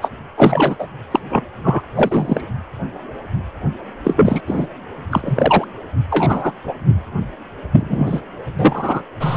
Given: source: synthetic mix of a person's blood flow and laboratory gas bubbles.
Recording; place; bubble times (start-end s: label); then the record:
Doppler ultrasound of blood flow; precordium
0.01-0.09 s: bubbles
0.37-0.76 s: bubbles
0.79-0.87 s: bubbles
1.11-1.20 s: bubbles
1.29-1.45 s: bubbles
1.63-1.81 s: bubbles
1.95-2.42 s: bubbles
4.04-4.40 s: bubbles
4.46-4.67 s: bubbles
5.10-5.65 s: bubbles
6.10-6.52 s: bubbles
6.63-6.75 s: bubbles
7.71-8.21 s: bubbles
8.59-9.02 s: bubbles
9.20-9.37 s: bubbles
From the record:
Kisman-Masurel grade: 233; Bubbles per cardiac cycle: several, 3 to 8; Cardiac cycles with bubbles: 50 to 99%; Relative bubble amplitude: loud (0.450 to 0.775); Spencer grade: 3 (all of the cardiac periods contain showers or single bubble signals, but not dominating or overriding the cardiac motion signals); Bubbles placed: anywhere in the cardiac cycle